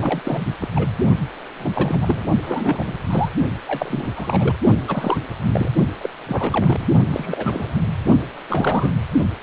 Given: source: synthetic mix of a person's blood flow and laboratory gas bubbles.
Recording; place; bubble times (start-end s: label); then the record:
Doppler ultrasound of blood flow; precordium
0.00-0.45 s: bubbles
0.59-0.68 s: bubbles
0.74-0.89 s: bubbles
1.58-1.99 s: bubbles
2.02-2.24 s: bubbles
2.42-2.95 s: bubbles
3.10-3.29 s: bubbles
3.67-4.10 s: bubbles
4.15-4.56 s: bubbles
4.87-5.18 s: bubbles
5.42-5.71 s: bubbles
6.01-6.09 s: bubbles
6.26-6.87 s: bubbles
7.12-7.79 s: bubbles
8.49-8.91 s: bubbles
9.41-9.43 s: bubbles
From the record:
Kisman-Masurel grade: 342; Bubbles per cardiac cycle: rolling drumbeat, 9 or more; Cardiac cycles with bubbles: 100%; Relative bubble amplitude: moderate (0.250 to 0.450); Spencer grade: 3 (all of the cardiac periods contain showers or single bubble signals, but not dominating or overriding the cardiac motion signals); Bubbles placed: only in the low amplitude regions of the cardiac cycle